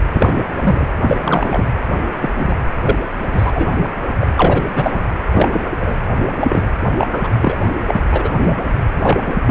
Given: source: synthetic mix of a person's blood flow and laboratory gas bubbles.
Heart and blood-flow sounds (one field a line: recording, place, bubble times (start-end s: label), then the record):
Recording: Doppler ultrasound of blood flow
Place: precordium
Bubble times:
0.13-0.35 s: bubbles
0.55-0.88 s: bubbles
1.02-1.17 s: bubbles
1.21-1.64 s: bubbles
2.21-2.33 s: bubbles
2.37-2.56 s: bubbles
2.84-2.96 s: bubbles
3.32-3.51 s: bubbles
3.54-3.77 s: bubbles
4.20-4.27 s: bubbles
4.37-4.62 s: bubbles
4.75-5.02 s: bubbles
5.32-5.74 s: bubbles
5.79-5.94 s: bubbles
6.40-6.67 s: bubbles
6.99-7.08 s: bubbles
7.12-7.33 s: bubbles
7.41-7.57 s: bubbles
7.88-8.03 s: bubbles
8.12-8.30 s: bubbles
8.33-8.56 s: bubbles
9.02-9.19 s: bubbles
9.25-9.33 s: bubbles
9.46-9.51 s: bubbles
From the record:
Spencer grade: 3 (all of the cardiac periods contain showers or single bubble signals, but not dominating or overriding the cardiac motion signals)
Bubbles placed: anywhere in the cardiac cycle